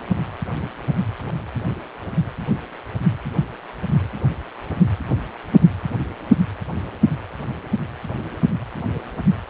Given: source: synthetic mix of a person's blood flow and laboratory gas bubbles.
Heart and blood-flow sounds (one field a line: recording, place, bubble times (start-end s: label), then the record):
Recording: Doppler ultrasound of blood flow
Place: precordium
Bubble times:
no bubbles
From the record:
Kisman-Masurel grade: 000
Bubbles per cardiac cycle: 0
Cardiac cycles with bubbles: 0%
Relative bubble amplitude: no bubbles discernible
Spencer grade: 0 (complete lack of bubble signals)